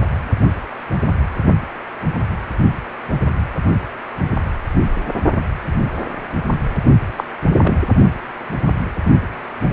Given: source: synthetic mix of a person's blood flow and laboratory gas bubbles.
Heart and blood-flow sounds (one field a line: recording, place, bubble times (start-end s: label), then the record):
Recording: Doppler ultrasound of blood flow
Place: precordium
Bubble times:
7.17-7.24 s: bubbles
7.62-7.77 s: bubbles
From the record:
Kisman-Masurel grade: 112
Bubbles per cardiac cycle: 1 to 2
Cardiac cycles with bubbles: 1 to 10%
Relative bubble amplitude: moderate (0.250 to 0.450)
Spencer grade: 1 (occasional bubble signal discernible with the cardiac motion signal, with majority of cardiac periods free of bubbles)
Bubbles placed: only in the low amplitude regions of the cardiac cycle